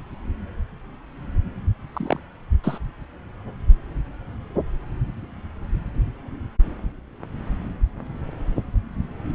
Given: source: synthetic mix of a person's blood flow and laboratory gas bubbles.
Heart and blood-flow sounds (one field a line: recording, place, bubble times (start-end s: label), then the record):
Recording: Doppler ultrasound of blood flow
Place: subclavian vein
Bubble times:
1.93-2.19 s: bubbles
2.63-2.78 s: bubbles
From the record:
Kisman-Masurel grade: 122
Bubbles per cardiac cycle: 1 to 2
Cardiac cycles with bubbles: 10 to 50%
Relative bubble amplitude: moderate (0.250 to 0.450)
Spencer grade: 2 (many but less than half of the cardiac periods contain bubble signals, singularly or in groups)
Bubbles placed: anywhere in the cardiac cycle